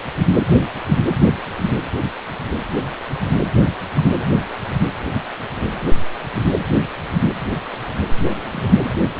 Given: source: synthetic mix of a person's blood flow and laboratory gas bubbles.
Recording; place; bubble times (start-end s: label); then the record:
Doppler ultrasound of blood flow; precordium
3.48-3.61 s: bubbles
3.97-4.26 s: bubbles
8.12-8.62 s: bubbles
8.68-8.96 s: bubbles
From the record:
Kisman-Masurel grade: 211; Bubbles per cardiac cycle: several, 3 to 8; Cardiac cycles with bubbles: 1 to 10%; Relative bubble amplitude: barely perceptible (0.100 to 0.250); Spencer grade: 1 (occasional bubble signal discernible with the cardiac motion signal, with majority of cardiac periods free of bubbles); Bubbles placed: anywhere in the cardiac cycle